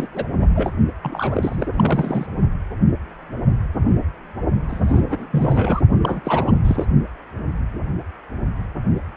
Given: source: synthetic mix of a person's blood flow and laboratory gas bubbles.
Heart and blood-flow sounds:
Doppler ultrasound of blood flow; precordium
0.00-0.07 s: bubbles
0.14-0.25 s: bubbles
0.38-0.70 s: bubbles
1.01-1.66 s: bubbles
1.70-2.26 s: bubbles
4.68-5.27 s: bubbles
5.31-5.81 s: bubbles
6.01-6.54 s: bubbles
6.63-6.87 s: bubbles
From the record:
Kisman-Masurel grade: 332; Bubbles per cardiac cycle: rolling drumbeat, 9 or more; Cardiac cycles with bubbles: 50 to 99%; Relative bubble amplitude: moderate (0.250 to 0.450); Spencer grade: 3 (all of the cardiac periods contain showers or single bubble signals, but not dominating or overriding the cardiac motion signals); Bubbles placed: only in the low amplitude regions of the cardiac cycle

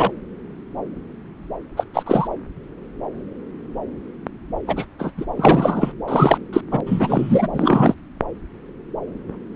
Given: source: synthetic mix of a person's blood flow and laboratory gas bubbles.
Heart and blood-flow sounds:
Doppler ultrasound of blood flow; subclavian vein
0.00-0.12 s: bubbles
1.76-1.84 s: bubbles
1.94-2.03 s: bubbles
2.06-2.27 s: bubbles
4.67-4.85 s: bubbles
4.98-5.12 s: bubbles
5.17-5.25 s: bubbles
5.37-5.92 s: bubbles
6.08-6.38 s: bubbles
6.52-6.61 s: bubbles
6.71-6.80 s: bubbles
6.86-7.48 s: bubbles
7.53-7.94 s: bubbles
From the record:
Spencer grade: 3 (all of the cardiac periods contain showers or single bubble signals, but not dominating or overriding the cardiac motion signals); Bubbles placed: anywhere in the cardiac cycle

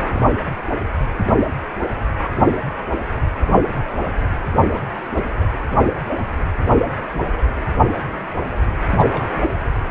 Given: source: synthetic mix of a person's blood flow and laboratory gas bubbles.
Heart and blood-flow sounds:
Doppler ultrasound of blood flow; precordium
0.06-0.30 s: bubbles
4.71-4.85 s: bubbles
5.13-5.47 s: bubbles
8.88-9.25 s: bubbles
9.44-9.55 s: bubbles
From the record:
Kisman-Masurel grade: 221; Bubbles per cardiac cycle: several, 3 to 8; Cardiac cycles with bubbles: 10 to 50%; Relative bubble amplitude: barely perceptible (0.100 to 0.250); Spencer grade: 2 (many but less than half of the cardiac periods contain bubble signals, singularly or in groups); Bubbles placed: anywhere in the cardiac cycle

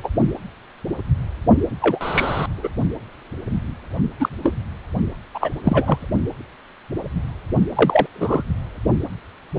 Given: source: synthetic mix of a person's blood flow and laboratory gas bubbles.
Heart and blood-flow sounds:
Doppler ultrasound of blood flow; precordium
0.04-0.09 s: bubbles
1.81-2.46 s: bubbles
2.57-2.69 s: bubbles
4.20-4.29 s: bubbles
4.43-4.55 s: bubbles
5.34-5.50 s: bubbles
5.64-6.08 s: bubbles
7.75-8.06 s: bubbles
8.14-8.43 s: bubbles
From the record:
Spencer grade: 3 (all of the cardiac periods contain showers or single bubble signals, but not dominating or overriding the cardiac motion signals); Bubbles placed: only in the low amplitude regions of the cardiac cycle

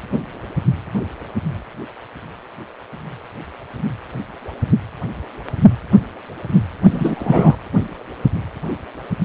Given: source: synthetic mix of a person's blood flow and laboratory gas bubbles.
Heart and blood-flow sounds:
Doppler ultrasound of blood flow; precordium
6.91-7.57 s: bubbles
From the record:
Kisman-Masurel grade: 213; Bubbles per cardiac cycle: several, 3 to 8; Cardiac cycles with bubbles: 1 to 10%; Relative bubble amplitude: loud (0.450 to 0.775); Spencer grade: 1 (occasional bubble signal discernible with the cardiac motion signal, with majority of cardiac periods free of bubbles); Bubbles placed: anywhere in the cardiac cycle

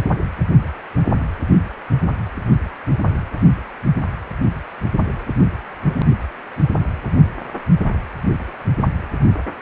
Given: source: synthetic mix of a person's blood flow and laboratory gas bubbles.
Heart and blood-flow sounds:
Doppler ultrasound of blood flow; precordium
no bubbles
From the record:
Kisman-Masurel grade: 000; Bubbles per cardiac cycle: 0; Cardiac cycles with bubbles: 0%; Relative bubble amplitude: no bubbles discernible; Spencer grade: 0 (complete lack of bubble signals)

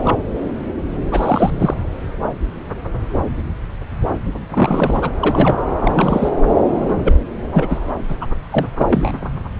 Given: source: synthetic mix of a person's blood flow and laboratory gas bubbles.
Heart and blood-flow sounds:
Doppler ultrasound of blood flow; subclavian vein
0.02-0.20 s: bubbles
1.11-1.74 s: bubbles
4.49-5.11 s: bubbles
5.20-5.62 s: bubbles
5.80-6.33 s: bubbles
6.68-7.16 s: bubbles
7.50-7.79 s: bubbles
8.08-8.15 s: bubbles
8.20-8.26 s: bubbles
8.50-8.66 s: bubbles
8.79-8.86 s: bubbles
8.90-9.11 s: bubbles
From the record:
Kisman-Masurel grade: 332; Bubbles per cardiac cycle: rolling drumbeat, 9 or more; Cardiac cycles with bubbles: 50 to 99%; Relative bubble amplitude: moderate (0.250 to 0.450); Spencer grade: 3 (all of the cardiac periods contain showers or single bubble signals, but not dominating or overriding the cardiac motion signals); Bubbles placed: anywhere in the cardiac cycle

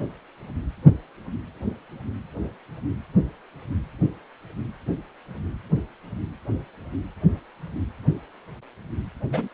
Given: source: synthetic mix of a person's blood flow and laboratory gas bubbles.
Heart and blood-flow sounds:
Doppler ultrasound of blood flow; precordium
9.31-9.48 s: bubbles
From the record:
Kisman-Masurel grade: 111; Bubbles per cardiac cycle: 1 to 2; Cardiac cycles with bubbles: 1 to 10%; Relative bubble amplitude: barely perceptible (0.100 to 0.250); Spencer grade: 1 (occasional bubble signal discernible with the cardiac motion signal, with majority of cardiac periods free of bubbles); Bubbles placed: anywhere in the cardiac cycle

